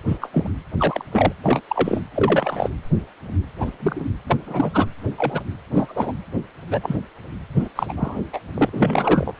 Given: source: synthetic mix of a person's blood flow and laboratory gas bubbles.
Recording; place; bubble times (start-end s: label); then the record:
Doppler ultrasound of blood flow; precordium
0.07-0.17 s: bubbles
0.21-0.29 s: bubbles
0.33-0.48 s: bubbles
0.78-1.04 s: bubbles
1.12-1.33 s: bubbles
1.44-1.60 s: bubbles
1.69-2.00 s: bubbles
2.15-2.69 s: bubbles
3.60-3.71 s: bubbles
3.79-4.05 s: bubbles
4.26-4.37 s: bubbles
4.46-4.71 s: bubbles
4.74-4.85 s: bubbles
5.17-5.40 s: bubbles
5.74-6.12 s: bubbles
6.71-6.96 s: bubbles
7.56-7.68 s: bubbles
7.75-7.93 s: bubbles
7.96-8.20 s: bubbles
8.33-8.40 s: bubbles
8.54-8.70 s: bubbles
8.73-9.33 s: bubbles
From the record:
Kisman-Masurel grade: 232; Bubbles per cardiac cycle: several, 3 to 8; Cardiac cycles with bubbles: 50 to 99%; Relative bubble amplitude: moderate (0.250 to 0.450); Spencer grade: 3 (all of the cardiac periods contain showers or single bubble signals, but not dominating or overriding the cardiac motion signals); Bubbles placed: anywhere in the cardiac cycle